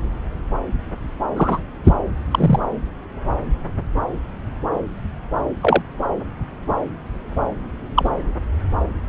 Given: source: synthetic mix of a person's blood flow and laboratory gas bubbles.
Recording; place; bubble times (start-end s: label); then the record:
Doppler ultrasound of blood flow; subclavian vein
1.36-1.60 s: bubbles
1.84-1.93 s: bubbles
2.31-2.60 s: bubbles
5.61-5.82 s: bubbles
7.95-8.10 s: bubbles
From the record:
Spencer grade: 2 (many but less than half of the cardiac periods contain bubble signals, singularly or in groups); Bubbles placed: anywhere in the cardiac cycle